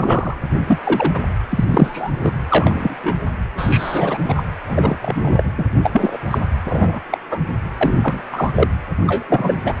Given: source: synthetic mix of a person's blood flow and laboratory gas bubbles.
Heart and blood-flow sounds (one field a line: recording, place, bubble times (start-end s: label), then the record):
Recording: Doppler ultrasound of blood flow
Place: precordium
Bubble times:
0.00-0.35 s: bubbles
0.67-0.79 s: bubbles
0.84-1.20 s: bubbles
1.49-1.64 s: bubbles
1.67-2.10 s: bubbles
2.23-2.33 s: bubbles
2.50-3.17 s: bubbles
3.57-4.17 s: bubbles
4.23-4.43 s: bubbles
4.67-4.97 s: bubbles
5.01-5.52 s: bubbles
5.58-5.66 s: bubbles
5.83-6.17 s: bubbles
6.30-6.38 s: bubbles
6.65-7.00 s: bubbles
7.10-7.18 s: bubbles
7.29-7.39 s: bubbles
7.80-8.21 s: bubbles
8.32-8.68 s: bubbles
9.07-9.25 s: bubbles
9.29-9.57 s: bubbles
9.65-9.74 s: bubbles
From the record:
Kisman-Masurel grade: 243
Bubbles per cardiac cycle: several, 3 to 8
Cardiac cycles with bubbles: 100%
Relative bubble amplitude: loud (0.450 to 0.775)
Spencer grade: 3 (all of the cardiac periods contain showers or single bubble signals, but not dominating or overriding the cardiac motion signals)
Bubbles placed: anywhere in the cardiac cycle